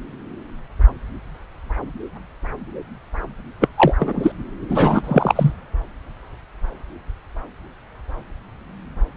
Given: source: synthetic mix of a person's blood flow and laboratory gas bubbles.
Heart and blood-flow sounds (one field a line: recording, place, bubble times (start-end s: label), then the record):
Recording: Doppler ultrasound of blood flow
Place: subclavian vein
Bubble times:
3.60-3.68 s: bubbles
3.78-3.93 s: bubbles
3.99-4.32 s: bubbles
4.68-5.53 s: bubbles
From the record:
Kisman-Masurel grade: 223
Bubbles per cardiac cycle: several, 3 to 8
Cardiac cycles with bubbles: 10 to 50%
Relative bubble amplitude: loud (0.450 to 0.775)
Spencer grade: 2 (many but less than half of the cardiac periods contain bubble signals, singularly or in groups)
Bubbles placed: anywhere in the cardiac cycle